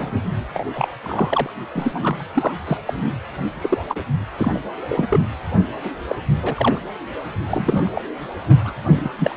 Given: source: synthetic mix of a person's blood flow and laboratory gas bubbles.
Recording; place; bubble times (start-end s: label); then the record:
Doppler ultrasound of blood flow; precordium
0.00-0.14 s: bubbles
0.17-0.23 s: bubbles
0.53-0.66 s: bubbles
0.75-0.88 s: bubbles
1.02-1.50 s: bubbles
1.73-2.17 s: bubbles
2.19-2.24 s: bubbles
2.34-2.54 s: bubbles
2.67-2.77 s: bubbles
2.85-2.94 s: bubbles
3.61-3.78 s: bubbles
3.88-3.96 s: bubbles
4.38-4.51 s: bubbles
4.54-4.59 s: bubbles
4.89-5.21 s: bubbles
5.84-5.91 s: bubbles
6.08-6.16 s: bubbles
6.42-6.78 s: bubbles
7.49-8.02 s: bubbles
8.47-8.73 s: bubbles
8.95-9.11 s: bubbles
9.18-9.36 s: bubbles
From the record:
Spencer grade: 3 (all of the cardiac periods contain showers or single bubble signals, but not dominating or overriding the cardiac motion signals); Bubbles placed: anywhere in the cardiac cycle